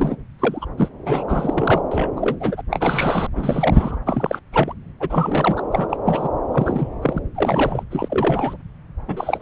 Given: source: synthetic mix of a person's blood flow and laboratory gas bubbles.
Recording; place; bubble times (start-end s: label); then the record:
Doppler ultrasound of blood flow; subclavian vein
0.00-0.16 s: bubbles
0.39-0.66 s: bubbles
0.78-0.88 s: bubbles
1.06-1.82 s: bubbles
1.91-2.11 s: bubbles
2.16-2.36 s: bubbles
2.40-2.61 s: bubbles
2.71-3.28 s: bubbles
3.35-3.99 s: bubbles
4.06-4.39 s: bubbles
4.52-4.73 s: bubbles
5.00-5.62 s: bubbles
5.71-5.87 s: bubbles
5.89-5.97 s: bubbles
6.05-6.28 s: bubbles
6.51-6.88 s: bubbles
7.02-7.18 s: bubbles
7.35-7.83 s: bubbles
7.90-8.57 s: bubbles
9.08-9.42 s: bubbles
From the record:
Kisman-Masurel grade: 342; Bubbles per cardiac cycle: rolling drumbeat, 9 or more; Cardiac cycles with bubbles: 100%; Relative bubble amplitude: moderate (0.250 to 0.450); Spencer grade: 3 (all of the cardiac periods contain showers or single bubble signals, but not dominating or overriding the cardiac motion signals); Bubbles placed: anywhere in the cardiac cycle